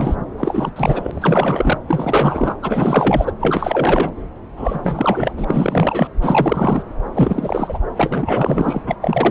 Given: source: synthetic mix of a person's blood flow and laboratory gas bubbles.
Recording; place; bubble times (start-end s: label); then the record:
Doppler ultrasound of blood flow; subclavian vein
0.00-0.16 s: bubbles
0.37-0.71 s: bubbles
0.76-1.78 s: bubbles
1.88-2.54 s: bubbles
2.62-3.32 s: bubbles
3.40-4.12 s: bubbles
4.56-5.34 s: bubbles
5.37-6.08 s: bubbles
6.21-6.83 s: bubbles
7.14-7.79 s: bubbles
7.96-8.82 s: bubbles
8.86-8.96 s: bubbles
9.01-9.31 s: bubbles
From the record:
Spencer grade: 4 (maximum detectable bubble signal sounding continuously throughout systole and diastole of every cardiac period, and overriding the amplitude of the normal cardiac signals); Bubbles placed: anywhere in the cardiac cycle